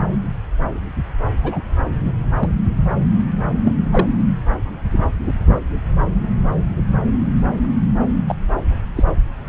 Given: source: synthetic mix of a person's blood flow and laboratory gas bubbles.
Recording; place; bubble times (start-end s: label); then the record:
Doppler ultrasound of blood flow; subclavian vein
1.43-1.58 s: bubbles
2.04-2.11 s: bubbles
2.38-2.48 s: bubbles
3.64-3.74 s: bubbles
3.92-4.07 s: bubbles
8.27-8.35 s: bubbles
8.96-9.03 s: bubbles
From the record:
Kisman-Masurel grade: 122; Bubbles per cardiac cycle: 1 to 2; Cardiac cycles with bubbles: 10 to 50%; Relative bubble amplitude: moderate (0.250 to 0.450); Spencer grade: 2 (many but less than half of the cardiac periods contain bubble signals, singularly or in groups); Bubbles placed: anywhere in the cardiac cycle